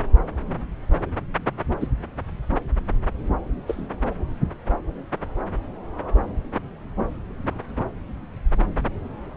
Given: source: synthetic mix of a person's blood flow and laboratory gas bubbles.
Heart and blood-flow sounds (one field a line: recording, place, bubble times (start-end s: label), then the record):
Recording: Doppler ultrasound of blood flow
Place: subclavian vein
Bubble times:
1.80-1.87 s: bubbles
2.50-2.56 s: bubbles
3.67-3.87 s: bubbles
From the record:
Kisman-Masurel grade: 122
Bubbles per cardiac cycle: 1 to 2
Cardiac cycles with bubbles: 10 to 50%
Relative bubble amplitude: moderate (0.250 to 0.450)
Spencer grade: 2 (many but less than half of the cardiac periods contain bubble signals, singularly or in groups)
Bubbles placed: anywhere in the cardiac cycle